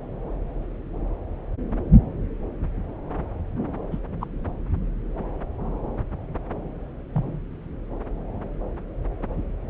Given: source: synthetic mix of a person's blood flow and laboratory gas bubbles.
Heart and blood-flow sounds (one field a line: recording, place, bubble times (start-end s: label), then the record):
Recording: Doppler ultrasound of blood flow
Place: subclavian vein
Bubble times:
3.91-3.98 s: bubbles
4.20-4.25 s: bubbles
7.13-7.40 s: bubbles
From the record:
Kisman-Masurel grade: 121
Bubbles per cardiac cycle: 1 to 2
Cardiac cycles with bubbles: 10 to 50%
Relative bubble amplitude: barely perceptible (0.100 to 0.250)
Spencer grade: 2 (many but less than half of the cardiac periods contain bubble signals, singularly or in groups)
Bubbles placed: anywhere in the cardiac cycle